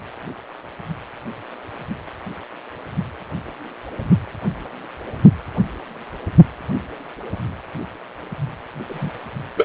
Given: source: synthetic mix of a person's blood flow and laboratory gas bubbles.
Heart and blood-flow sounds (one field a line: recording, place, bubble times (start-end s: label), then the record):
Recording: Doppler ultrasound of blood flow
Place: precordium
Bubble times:
8.89-9.10 s: bubbles
9.57-9.65 s: bubbles
From the record:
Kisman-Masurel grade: 223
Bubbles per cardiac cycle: several, 3 to 8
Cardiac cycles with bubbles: 10 to 50%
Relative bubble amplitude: loud (0.450 to 0.775)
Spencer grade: 2 (many but less than half of the cardiac periods contain bubble signals, singularly or in groups)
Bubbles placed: anywhere in the cardiac cycle